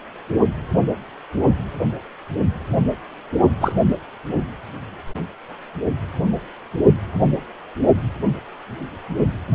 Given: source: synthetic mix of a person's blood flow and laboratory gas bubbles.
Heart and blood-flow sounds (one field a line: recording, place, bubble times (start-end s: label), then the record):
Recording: Doppler ultrasound of blood flow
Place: precordium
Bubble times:
3.60-3.73 s: bubbles
From the record:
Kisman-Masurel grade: 113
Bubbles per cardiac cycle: 1 to 2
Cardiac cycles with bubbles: 1 to 10%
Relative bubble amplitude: loud (0.450 to 0.775)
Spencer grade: 1 (occasional bubble signal discernible with the cardiac motion signal, with majority of cardiac periods free of bubbles)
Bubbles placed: anywhere in the cardiac cycle